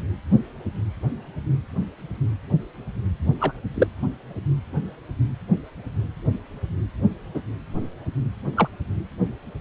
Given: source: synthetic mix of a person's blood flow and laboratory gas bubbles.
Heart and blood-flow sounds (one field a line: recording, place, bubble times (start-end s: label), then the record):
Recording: Doppler ultrasound of blood flow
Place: precordium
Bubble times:
3.40-3.53 s: bubbles
3.74-3.87 s: bubbles
7.34-7.41 s: bubbles
8.57-8.69 s: bubbles
From the record:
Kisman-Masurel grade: 122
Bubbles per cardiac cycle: 1 to 2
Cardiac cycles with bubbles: 10 to 50%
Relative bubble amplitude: moderate (0.250 to 0.450)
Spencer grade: 2 (many but less than half of the cardiac periods contain bubble signals, singularly or in groups)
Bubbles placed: anywhere in the cardiac cycle